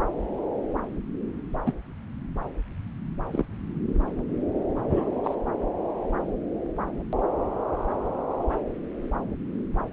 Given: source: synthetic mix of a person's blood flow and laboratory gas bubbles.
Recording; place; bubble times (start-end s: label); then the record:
Doppler ultrasound of blood flow; subclavian vein
1.66-1.73 s: bubbles
3.31-3.45 s: bubbles
4.75-5.09 s: bubbles
5.24-5.35 s: bubbles
From the record:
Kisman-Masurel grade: 121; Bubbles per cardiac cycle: 1 to 2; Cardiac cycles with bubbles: 10 to 50%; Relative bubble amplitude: barely perceptible (0.100 to 0.250); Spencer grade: 2 (many but less than half of the cardiac periods contain bubble signals, singularly or in groups); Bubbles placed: anywhere in the cardiac cycle